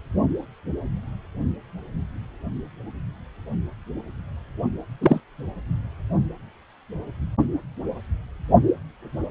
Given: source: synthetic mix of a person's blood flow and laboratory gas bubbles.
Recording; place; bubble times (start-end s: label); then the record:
Doppler ultrasound of blood flow; precordium
5.00-5.20 s: bubbles
From the record:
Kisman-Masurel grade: 112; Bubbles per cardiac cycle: 1 to 2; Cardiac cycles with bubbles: 1 to 10%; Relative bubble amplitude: moderate (0.250 to 0.450); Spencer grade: 1 (occasional bubble signal discernible with the cardiac motion signal, with majority of cardiac periods free of bubbles); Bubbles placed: anywhere in the cardiac cycle